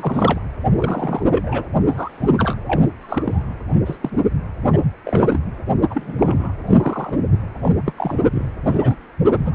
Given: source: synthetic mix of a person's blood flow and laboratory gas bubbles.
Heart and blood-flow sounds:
Doppler ultrasound of blood flow; precordium
0.00-0.41 s: bubbles
0.74-1.23 s: bubbles
1.30-1.65 s: bubbles
1.72-1.83 s: bubbles
1.88-2.30 s: bubbles
2.38-2.56 s: bubbles
2.67-2.83 s: bubbles
3.00-3.43 s: bubbles
3.71-3.96 s: bubbles
4.02-4.10 s: bubbles
4.62-4.81 s: bubbles
5.04-5.39 s: bubbles
5.90-6.54 s: bubbles
6.67-7.21 s: bubbles
7.62-7.75 s: bubbles
7.85-7.93 s: bubbles
7.96-8.21 s: bubbles
8.31-8.49 s: bubbles
8.65-9.01 s: bubbles
9.30-9.54 s: bubbles
From the record:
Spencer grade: 3 (all of the cardiac periods contain showers or single bubble signals, but not dominating or overriding the cardiac motion signals); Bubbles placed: anywhere in the cardiac cycle

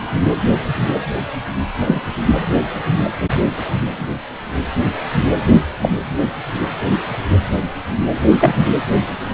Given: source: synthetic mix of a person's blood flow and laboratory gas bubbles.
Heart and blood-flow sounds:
Doppler ultrasound of blood flow; precordium
1.79-2.00 s: bubbles
5.82-5.89 s: bubbles
8.39-8.55 s: bubbles
From the record:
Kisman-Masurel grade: 123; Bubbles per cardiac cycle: 1 to 2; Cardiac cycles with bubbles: 10 to 50%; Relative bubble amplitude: loud (0.450 to 0.775); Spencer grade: 2 (many but less than half of the cardiac periods contain bubble signals, singularly or in groups); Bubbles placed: anywhere in the cardiac cycle

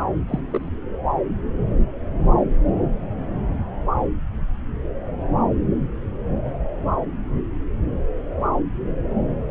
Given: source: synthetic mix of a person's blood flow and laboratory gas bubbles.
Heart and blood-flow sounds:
Doppler ultrasound of blood flow; subclavian vein
0.28-0.40 s: bubbles
0.51-0.69 s: bubbles
From the record:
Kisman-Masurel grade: 211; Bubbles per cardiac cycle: several, 3 to 8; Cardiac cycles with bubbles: 1 to 10%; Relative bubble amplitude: barely perceptible (0.100 to 0.250); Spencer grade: 1 (occasional bubble signal discernible with the cardiac motion signal, with majority of cardiac periods free of bubbles); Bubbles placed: anywhere in the cardiac cycle

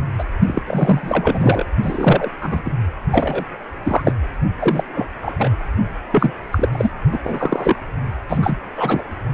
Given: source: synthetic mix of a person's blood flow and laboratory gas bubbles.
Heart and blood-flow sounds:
Doppler ultrasound of blood flow; precordium
0.18-0.24 s: bubbles
0.48-0.62 s: bubbles
0.67-1.66 s: bubbles
1.82-2.31 s: bubbles
2.41-2.71 s: bubbles
3.11-3.45 s: bubbles
3.83-4.02 s: bubbles
4.04-4.13 s: bubbles
4.59-4.83 s: bubbles
4.94-5.08 s: bubbles
5.21-5.50 s: bubbles
6.12-6.33 s: bubbles
6.52-6.69 s: bubbles
6.71-6.91 s: bubbles
7.12-7.20 s: bubbles
7.24-7.77 s: bubbles
8.28-8.57 s: bubbles
8.76-9.03 s: bubbles
From the record:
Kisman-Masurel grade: 243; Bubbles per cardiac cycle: several, 3 to 8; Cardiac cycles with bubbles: 100%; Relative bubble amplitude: loud (0.450 to 0.775); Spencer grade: 3 (all of the cardiac periods contain showers or single bubble signals, but not dominating or overriding the cardiac motion signals); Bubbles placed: only in the low amplitude regions of the cardiac cycle

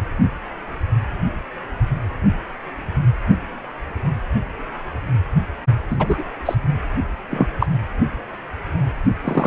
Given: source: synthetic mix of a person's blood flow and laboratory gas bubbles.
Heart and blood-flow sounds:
Doppler ultrasound of blood flow; precordium
5.89-6.22 s: bubbles
6.45-6.55 s: bubbles
7.30-7.47 s: bubbles
7.59-7.67 s: bubbles
9.24-9.47 s: bubbles
From the record:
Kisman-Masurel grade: 223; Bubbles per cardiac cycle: several, 3 to 8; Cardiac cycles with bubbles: 10 to 50%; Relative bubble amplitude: loud (0.450 to 0.775); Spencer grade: 2 (many but less than half of the cardiac periods contain bubble signals, singularly or in groups); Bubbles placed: only in the low amplitude regions of the cardiac cycle

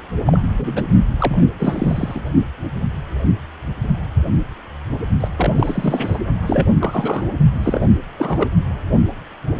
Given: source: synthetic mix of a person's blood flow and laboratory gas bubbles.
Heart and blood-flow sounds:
Doppler ultrasound of blood flow; precordium
0.26-0.84 s: bubbles
1.19-1.47 s: bubbles
1.59-2.22 s: bubbles
5.20-5.28 s: bubbles
5.36-6.18 s: bubbles
6.46-6.70 s: bubbles
6.80-7.27 s: bubbles
7.56-7.88 s: bubbles
8.18-8.48 s: bubbles
From the record:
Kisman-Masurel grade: 332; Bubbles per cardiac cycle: rolling drumbeat, 9 or more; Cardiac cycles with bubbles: 50 to 99%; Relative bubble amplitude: moderate (0.250 to 0.450); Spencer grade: 3 (all of the cardiac periods contain showers or single bubble signals, but not dominating or overriding the cardiac motion signals); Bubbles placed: only in the low amplitude regions of the cardiac cycle

